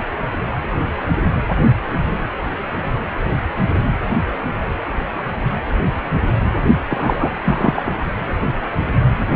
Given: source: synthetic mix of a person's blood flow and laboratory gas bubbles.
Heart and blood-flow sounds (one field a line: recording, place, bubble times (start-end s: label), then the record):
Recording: Doppler ultrasound of blood flow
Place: precordium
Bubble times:
6.88-7.31 s: bubbles
7.44-7.96 s: bubbles
From the record:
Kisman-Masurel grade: 213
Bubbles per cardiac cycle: several, 3 to 8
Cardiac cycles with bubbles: 1 to 10%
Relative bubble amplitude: loud (0.450 to 0.775)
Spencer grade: 1 (occasional bubble signal discernible with the cardiac motion signal, with majority of cardiac periods free of bubbles)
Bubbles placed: anywhere in the cardiac cycle